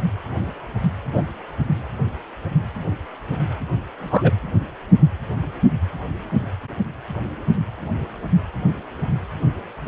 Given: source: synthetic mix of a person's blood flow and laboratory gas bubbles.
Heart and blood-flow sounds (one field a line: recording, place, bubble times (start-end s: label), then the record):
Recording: Doppler ultrasound of blood flow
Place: precordium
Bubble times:
1.12-1.23 s: bubbles
4.00-4.31 s: bubbles
From the record:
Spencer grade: 1 (occasional bubble signal discernible with the cardiac motion signal, with majority of cardiac periods free of bubbles)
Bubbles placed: anywhere in the cardiac cycle